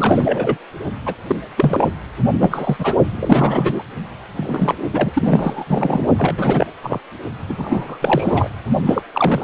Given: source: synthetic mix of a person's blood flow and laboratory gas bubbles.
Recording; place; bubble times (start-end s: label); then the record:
Doppler ultrasound of blood flow; precordium
0.00-0.57 s: bubbles
1.05-1.15 s: bubbles
1.28-1.35 s: bubbles
1.57-1.89 s: bubbles
2.41-2.76 s: bubbles
2.79-2.95 s: bubbles
3.10-3.82 s: bubbles
4.35-4.75 s: bubbles
4.93-6.06 s: bubbles
6.17-6.34 s: bubbles
6.38-6.67 s: bubbles
6.82-6.99 s: bubbles
7.48-7.97 s: bubbles
8.02-8.49 s: bubbles
8.86-9.02 s: bubbles
9.13-9.44 s: bubbles
From the record:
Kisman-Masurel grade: 343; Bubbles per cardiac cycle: rolling drumbeat, 9 or more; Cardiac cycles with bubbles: 100%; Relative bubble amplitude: loud (0.450 to 0.775); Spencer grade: 3 (all of the cardiac periods contain showers or single bubble signals, but not dominating or overriding the cardiac motion signals); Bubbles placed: only in the low amplitude regions of the cardiac cycle